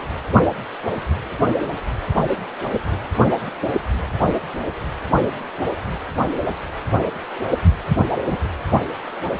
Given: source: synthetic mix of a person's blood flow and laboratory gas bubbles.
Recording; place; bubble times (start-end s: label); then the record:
Doppler ultrasound of blood flow; precordium
8.28-8.37 s: bubbles
From the record:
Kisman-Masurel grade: 113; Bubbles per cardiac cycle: 1 to 2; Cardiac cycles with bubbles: 1 to 10%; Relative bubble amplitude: loud (0.450 to 0.775); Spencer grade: 1 (occasional bubble signal discernible with the cardiac motion signal, with majority of cardiac periods free of bubbles); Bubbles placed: anywhere in the cardiac cycle